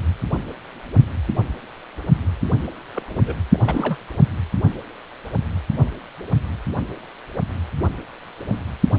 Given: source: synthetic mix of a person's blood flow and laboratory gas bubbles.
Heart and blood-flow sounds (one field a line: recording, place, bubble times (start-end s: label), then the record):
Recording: Doppler ultrasound of blood flow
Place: precordium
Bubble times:
2.92-3.03 s: bubbles
3.06-3.38 s: bubbles
3.53-3.98 s: bubbles
From the record:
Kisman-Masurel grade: 221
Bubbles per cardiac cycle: several, 3 to 8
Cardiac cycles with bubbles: 10 to 50%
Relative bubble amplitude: barely perceptible (0.100 to 0.250)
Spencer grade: 2 (many but less than half of the cardiac periods contain bubble signals, singularly or in groups)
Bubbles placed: only in the low amplitude regions of the cardiac cycle